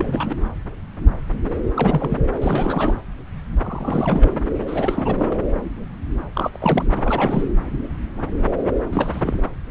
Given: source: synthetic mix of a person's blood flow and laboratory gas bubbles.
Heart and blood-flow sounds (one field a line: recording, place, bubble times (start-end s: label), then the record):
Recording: Doppler ultrasound of blood flow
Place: subclavian vein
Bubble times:
0.00-0.36 s: bubbles
1.75-2.19 s: bubbles
2.42-2.95 s: bubbles
3.64-4.29 s: bubbles
4.52-4.57 s: bubbles
4.67-5.38 s: bubbles
6.34-7.43 s: bubbles
8.63-8.71 s: bubbles
8.92-9.43 s: bubbles
From the record:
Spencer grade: 3 (all of the cardiac periods contain showers or single bubble signals, but not dominating or overriding the cardiac motion signals)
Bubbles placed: anywhere in the cardiac cycle